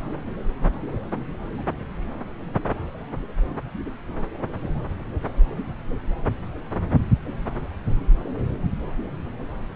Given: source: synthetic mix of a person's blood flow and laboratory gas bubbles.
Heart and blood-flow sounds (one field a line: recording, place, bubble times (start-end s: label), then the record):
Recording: Doppler ultrasound of blood flow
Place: subclavian vein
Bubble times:
no bubbles
From the record:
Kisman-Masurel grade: 000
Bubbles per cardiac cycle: 0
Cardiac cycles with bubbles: 0%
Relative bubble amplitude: no bubbles discernible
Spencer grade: 0 (complete lack of bubble signals)